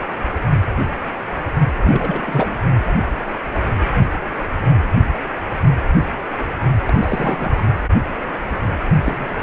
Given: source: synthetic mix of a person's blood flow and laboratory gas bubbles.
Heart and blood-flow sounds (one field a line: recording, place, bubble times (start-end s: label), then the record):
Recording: Doppler ultrasound of blood flow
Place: precordium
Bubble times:
1.82-2.58 s: bubbles
6.86-7.63 s: bubbles
9.04-9.42 s: bubbles
From the record:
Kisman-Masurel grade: 222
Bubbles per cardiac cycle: several, 3 to 8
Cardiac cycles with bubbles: 10 to 50%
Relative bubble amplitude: moderate (0.250 to 0.450)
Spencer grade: 2 (many but less than half of the cardiac periods contain bubble signals, singularly or in groups)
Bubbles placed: only in the low amplitude regions of the cardiac cycle